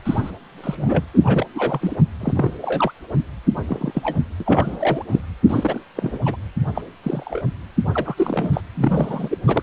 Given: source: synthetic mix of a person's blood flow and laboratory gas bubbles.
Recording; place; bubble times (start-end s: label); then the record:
Doppler ultrasound of blood flow; precordium
0.05-0.32 s: bubbles
0.58-1.05 s: bubbles
1.14-1.46 s: bubbles
1.54-1.96 s: bubbles
2.20-2.55 s: bubbles
2.62-2.92 s: bubbles
3.17-3.24 s: bubbles
3.68-4.17 s: bubbles
4.40-5.05 s: bubbles
5.11-5.21 s: bubbles
5.43-5.81 s: bubbles
5.96-6.18 s: bubbles
6.25-6.36 s: bubbles
6.75-6.81 s: bubbles
7.02-7.42 s: bubbles
7.93-8.61 s: bubbles
8.74-9.38 s: bubbles
9.46-9.63 s: bubbles
From the record:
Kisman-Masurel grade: 242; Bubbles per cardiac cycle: several, 3 to 8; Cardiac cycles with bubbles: 100%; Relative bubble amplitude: moderate (0.250 to 0.450); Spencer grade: 3 (all of the cardiac periods contain showers or single bubble signals, but not dominating or overriding the cardiac motion signals); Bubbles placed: anywhere in the cardiac cycle